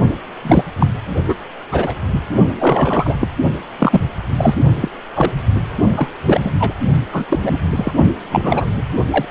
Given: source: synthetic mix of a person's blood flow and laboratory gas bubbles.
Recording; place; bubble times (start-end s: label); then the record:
Doppler ultrasound of blood flow; precordium
0.41-0.65 s: bubbles
0.79-0.89 s: bubbles
1.28-1.35 s: bubbles
1.72-1.96 s: bubbles
2.11-2.20 s: bubbles
2.59-3.16 s: bubbles
3.20-3.29 s: bubbles
3.79-4.00 s: bubbles
4.38-4.54 s: bubbles
4.81-4.88 s: bubbles
5.14-5.33 s: bubbles
5.96-6.09 s: bubbles
6.25-6.51 s: bubbles
6.60-6.73 s: bubbles
7.12-7.24 s: bubbles
7.29-7.39 s: bubbles
7.42-7.58 s: bubbles
7.75-7.93 s: bubbles
8.31-8.66 s: bubbles
9.11-9.25 s: bubbles
From the record:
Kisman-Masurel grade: 243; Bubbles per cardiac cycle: several, 3 to 8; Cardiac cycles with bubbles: 100%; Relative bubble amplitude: loud (0.450 to 0.775); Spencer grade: 3 (all of the cardiac periods contain showers or single bubble signals, but not dominating or overriding the cardiac motion signals); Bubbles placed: only in the low amplitude regions of the cardiac cycle